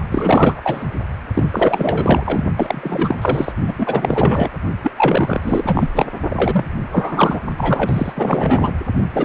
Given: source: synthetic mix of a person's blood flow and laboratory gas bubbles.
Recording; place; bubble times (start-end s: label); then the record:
Doppler ultrasound of blood flow; precordium
0.11-0.61 s: bubbles
0.63-0.88 s: bubbles
1.33-2.44 s: bubbles
2.56-3.52 s: bubbles
3.67-3.74 s: bubbles
3.78-4.50 s: bubbles
4.83-4.91 s: bubbles
4.96-5.90 s: bubbles
5.95-6.06 s: bubbles
6.29-6.66 s: bubbles
6.92-7.41 s: bubbles
7.57-8.72 s: bubbles
9.12-9.25 s: bubbles
From the record:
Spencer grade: 4 (maximum detectable bubble signal sounding continuously throughout systole and diastole of every cardiac period, and overriding the amplitude of the normal cardiac signals); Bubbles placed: only in the low amplitude regions of the cardiac cycle